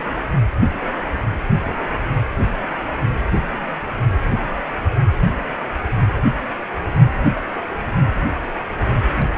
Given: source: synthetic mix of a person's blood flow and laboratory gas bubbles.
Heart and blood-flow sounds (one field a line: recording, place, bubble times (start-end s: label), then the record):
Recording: Doppler ultrasound of blood flow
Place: precordium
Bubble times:
9.16-9.28 s: bubbles
From the record:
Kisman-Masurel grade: 211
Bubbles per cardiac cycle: several, 3 to 8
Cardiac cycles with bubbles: 1 to 10%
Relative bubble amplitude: barely perceptible (0.100 to 0.250)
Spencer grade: 1 (occasional bubble signal discernible with the cardiac motion signal, with majority of cardiac periods free of bubbles)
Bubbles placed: anywhere in the cardiac cycle